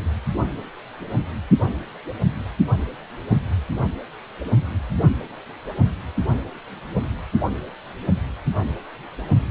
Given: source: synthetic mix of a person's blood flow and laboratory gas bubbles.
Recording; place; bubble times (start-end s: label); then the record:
Doppler ultrasound of blood flow; precordium
no bubbles
From the record:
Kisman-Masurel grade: 000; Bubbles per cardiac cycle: 0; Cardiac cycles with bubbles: 0%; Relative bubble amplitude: no bubbles discernible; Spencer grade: 0 (complete lack of bubble signals)